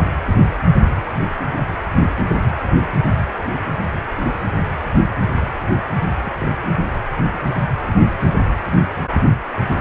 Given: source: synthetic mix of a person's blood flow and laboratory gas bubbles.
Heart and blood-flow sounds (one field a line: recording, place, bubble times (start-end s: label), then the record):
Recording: Doppler ultrasound of blood flow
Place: precordium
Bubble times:
3.91-4.01 s: bubbles
4.17-4.25 s: bubbles
6.22-6.33 s: bubbles
6.39-6.55 s: bubbles
From the record:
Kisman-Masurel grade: 121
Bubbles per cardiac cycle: 1 to 2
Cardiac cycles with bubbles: 10 to 50%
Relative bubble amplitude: barely perceptible (0.100 to 0.250)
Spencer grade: 2 (many but less than half of the cardiac periods contain bubble signals, singularly or in groups)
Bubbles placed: anywhere in the cardiac cycle